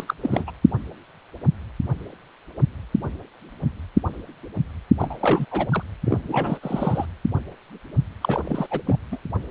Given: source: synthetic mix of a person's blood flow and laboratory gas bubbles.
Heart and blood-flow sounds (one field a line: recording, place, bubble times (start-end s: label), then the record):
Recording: Doppler ultrasound of blood flow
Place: precordium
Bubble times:
0.00-0.04 s: bubbles
0.07-0.14 s: bubbles
0.21-0.52 s: bubbles
4.99-5.17 s: bubbles
5.20-5.46 s: bubbles
5.51-5.67 s: bubbles
5.72-5.83 s: bubbles
6.04-6.18 s: bubbles
6.28-6.59 s: bubbles
6.62-7.06 s: bubbles
8.21-8.67 s: bubbles
8.71-8.80 s: bubbles
8.86-8.99 s: bubbles
9.12-9.18 s: bubbles
From the record:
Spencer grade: 3 (all of the cardiac periods contain showers or single bubble signals, but not dominating or overriding the cardiac motion signals)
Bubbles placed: anywhere in the cardiac cycle